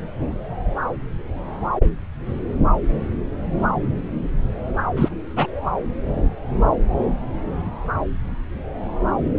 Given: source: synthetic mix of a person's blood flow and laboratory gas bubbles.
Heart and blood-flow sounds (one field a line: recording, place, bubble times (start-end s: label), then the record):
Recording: Doppler ultrasound of blood flow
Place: subclavian vein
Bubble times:
4.96-5.08 s: bubbles
5.36-5.46 s: bubbles
From the record:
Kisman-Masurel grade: 113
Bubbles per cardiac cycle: 1 to 2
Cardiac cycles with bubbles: 1 to 10%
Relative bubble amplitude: loud (0.450 to 0.775)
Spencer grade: 1 (occasional bubble signal discernible with the cardiac motion signal, with majority of cardiac periods free of bubbles)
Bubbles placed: anywhere in the cardiac cycle